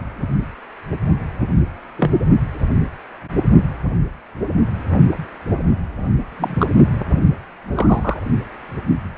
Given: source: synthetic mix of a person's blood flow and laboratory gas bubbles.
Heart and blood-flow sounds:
Doppler ultrasound of blood flow; precordium
1.98-2.11 s: bubbles
6.38-6.67 s: bubbles
7.08-7.19 s: bubbles
7.75-8.20 s: bubbles
From the record:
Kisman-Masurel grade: 123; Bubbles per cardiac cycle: 1 to 2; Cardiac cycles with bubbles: 10 to 50%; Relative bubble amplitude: loud (0.450 to 0.775); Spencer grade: 2 (many but less than half of the cardiac periods contain bubble signals, singularly or in groups); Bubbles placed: only in the low amplitude regions of the cardiac cycle

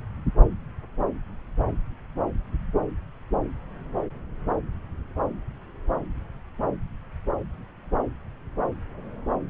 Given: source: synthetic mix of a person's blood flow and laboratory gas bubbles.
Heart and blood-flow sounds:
Doppler ultrasound of blood flow; subclavian vein
no bubbles
From the record:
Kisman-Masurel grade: 000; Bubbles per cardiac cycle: 0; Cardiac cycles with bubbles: 0%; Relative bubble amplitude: no bubbles discernible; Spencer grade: 0 (complete lack of bubble signals)

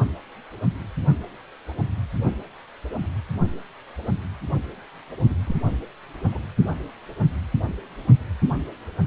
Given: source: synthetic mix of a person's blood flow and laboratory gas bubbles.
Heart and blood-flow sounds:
Doppler ultrasound of blood flow; precordium
5.29-5.35 s: bubbles
5.47-5.56 s: bubbles
6.32-6.40 s: bubbles
From the record:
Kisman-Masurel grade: 221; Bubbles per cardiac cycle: several, 3 to 8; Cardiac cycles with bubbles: 10 to 50%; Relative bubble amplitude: barely perceptible (0.100 to 0.250); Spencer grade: 2 (many but less than half of the cardiac periods contain bubble signals, singularly or in groups); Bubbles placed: only in the low amplitude regions of the cardiac cycle

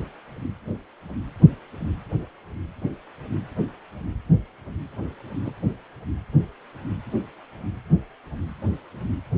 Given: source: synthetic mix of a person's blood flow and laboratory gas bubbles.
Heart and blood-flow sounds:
Doppler ultrasound of blood flow; precordium
5.45-5.54 s: bubbles
From the record:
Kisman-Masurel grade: 111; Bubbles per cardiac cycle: 1 to 2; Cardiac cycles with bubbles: 1 to 10%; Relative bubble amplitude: barely perceptible (0.100 to 0.250); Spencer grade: 1 (occasional bubble signal discernible with the cardiac motion signal, with majority of cardiac periods free of bubbles); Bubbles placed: anywhere in the cardiac cycle

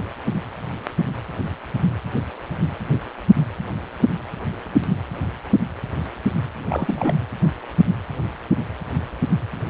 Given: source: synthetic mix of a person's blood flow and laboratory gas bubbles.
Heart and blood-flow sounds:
Doppler ultrasound of blood flow; precordium
6.66-7.14 s: bubbles
From the record:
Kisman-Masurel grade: 212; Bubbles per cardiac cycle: several, 3 to 8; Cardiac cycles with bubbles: 1 to 10%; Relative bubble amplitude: moderate (0.250 to 0.450); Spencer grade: 1 (occasional bubble signal discernible with the cardiac motion signal, with majority of cardiac periods free of bubbles); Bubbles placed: anywhere in the cardiac cycle

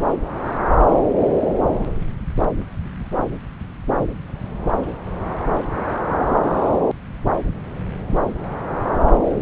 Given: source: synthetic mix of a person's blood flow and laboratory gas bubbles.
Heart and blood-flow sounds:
Doppler ultrasound of blood flow; subclavian vein
no bubbles
From the record:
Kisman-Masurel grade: 000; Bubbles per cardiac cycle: 0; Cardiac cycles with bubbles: 0%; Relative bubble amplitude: no bubbles discernible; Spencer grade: 0 (complete lack of bubble signals)

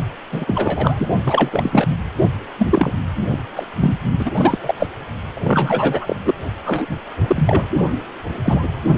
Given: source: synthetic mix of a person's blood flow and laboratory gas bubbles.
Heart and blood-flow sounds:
Doppler ultrasound of blood flow; precordium
0.32-1.07 s: bubbles
1.26-1.88 s: bubbles
2.58-2.93 s: bubbles
3.10-3.43 s: bubbles
3.56-3.68 s: bubbles
3.79-3.96 s: bubbles
4.19-4.32 s: bubbles
4.35-4.58 s: bubbles
4.63-4.75 s: bubbles
4.79-4.87 s: bubbles
5.33-6.16 s: bubbles
6.25-6.34 s: bubbles
6.65-6.87 s: bubbles
7.27-7.69 s: bubbles
8.43-8.63 s: bubbles
From the record:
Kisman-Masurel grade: 243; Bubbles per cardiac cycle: several, 3 to 8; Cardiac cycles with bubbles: 100%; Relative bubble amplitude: loud (0.450 to 0.775); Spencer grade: 3 (all of the cardiac periods contain showers or single bubble signals, but not dominating or overriding the cardiac motion signals); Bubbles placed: only in the low amplitude regions of the cardiac cycle

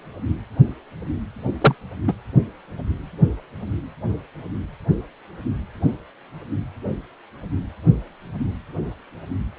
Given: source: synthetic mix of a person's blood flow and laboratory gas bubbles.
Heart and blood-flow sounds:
Doppler ultrasound of blood flow; precordium
1.61-1.74 s: bubbles
2.08-2.12 s: bubbles
From the record:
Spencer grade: 2 (many but less than half of the cardiac periods contain bubble signals, singularly or in groups); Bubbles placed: only in the low amplitude regions of the cardiac cycle

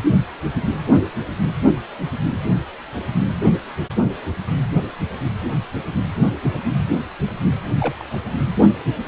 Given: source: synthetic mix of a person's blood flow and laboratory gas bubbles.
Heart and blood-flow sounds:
Doppler ultrasound of blood flow; precordium
7.79-8.15 s: bubbles
From the record:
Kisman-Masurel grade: 112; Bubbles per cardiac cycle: 1 to 2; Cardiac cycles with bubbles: 1 to 10%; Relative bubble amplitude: moderate (0.250 to 0.450); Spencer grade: 1 (occasional bubble signal discernible with the cardiac motion signal, with majority of cardiac periods free of bubbles); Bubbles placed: anywhere in the cardiac cycle

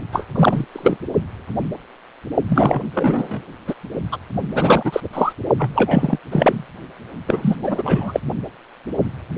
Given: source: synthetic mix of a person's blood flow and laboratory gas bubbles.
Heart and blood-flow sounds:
Doppler ultrasound of blood flow; precordium
0.12-0.26 s: bubbles
0.35-0.65 s: bubbles
0.72-0.98 s: bubbles
2.48-2.81 s: bubbles
2.95-3.43 s: bubbles
3.67-3.74 s: bubbles
4.12-4.18 s: bubbles
4.54-5.00 s: bubbles
5.13-5.33 s: bubbles
5.58-5.70 s: bubbles
5.75-6.19 s: bubbles
6.31-6.63 s: bubbles
7.27-7.56 s: bubbles
7.62-8.20 s: bubbles
From the record:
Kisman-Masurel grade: 333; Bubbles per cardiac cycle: rolling drumbeat, 9 or more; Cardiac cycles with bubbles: 50 to 99%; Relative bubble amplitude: loud (0.450 to 0.775); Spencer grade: 3 (all of the cardiac periods contain showers or single bubble signals, but not dominating or overriding the cardiac motion signals); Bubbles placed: only in the low amplitude regions of the cardiac cycle

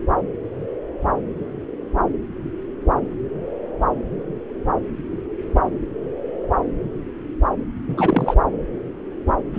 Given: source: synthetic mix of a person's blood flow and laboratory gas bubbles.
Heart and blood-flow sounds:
Doppler ultrasound of blood flow; subclavian vein
7.89-8.34 s: bubbles
9.54-9.59 s: bubbles
From the record:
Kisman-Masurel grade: 222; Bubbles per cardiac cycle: several, 3 to 8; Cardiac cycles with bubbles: 10 to 50%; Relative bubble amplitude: moderate (0.250 to 0.450); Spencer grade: 2 (many but less than half of the cardiac periods contain bubble signals, singularly or in groups); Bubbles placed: anywhere in the cardiac cycle

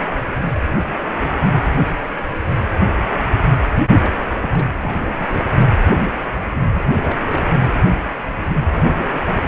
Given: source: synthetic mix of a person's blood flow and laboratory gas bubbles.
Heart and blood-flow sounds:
Doppler ultrasound of blood flow; precordium
3.97-4.10 s: bubbles
4.29-4.68 s: bubbles
4.82-5.43 s: bubbles
6.75-6.84 s: bubbles
6.95-7.45 s: bubbles
8.76-8.92 s: bubbles
8.95-9.21 s: bubbles
9.23-9.48 s: bubbles
From the record:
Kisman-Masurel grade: 221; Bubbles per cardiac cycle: several, 3 to 8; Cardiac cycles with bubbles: 10 to 50%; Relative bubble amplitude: barely perceptible (0.100 to 0.250); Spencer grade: 2 (many but less than half of the cardiac periods contain bubble signals, singularly or in groups); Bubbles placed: anywhere in the cardiac cycle

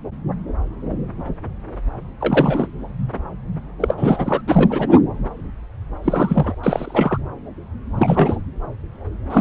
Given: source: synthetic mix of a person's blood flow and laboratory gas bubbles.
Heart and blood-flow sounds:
Doppler ultrasound of blood flow; subclavian vein
2.20-2.67 s: bubbles
3.80-3.94 s: bubbles
3.97-4.41 s: bubbles
4.47-5.00 s: bubbles
6.03-6.55 s: bubbles
6.63-7.17 s: bubbles
7.98-8.41 s: bubbles
9.29-9.41 s: bubbles
From the record:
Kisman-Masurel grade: 332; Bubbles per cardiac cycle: rolling drumbeat, 9 or more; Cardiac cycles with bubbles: 50 to 99%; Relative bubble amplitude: moderate (0.250 to 0.450); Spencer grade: 3 (all of the cardiac periods contain showers or single bubble signals, but not dominating or overriding the cardiac motion signals); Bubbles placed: anywhere in the cardiac cycle

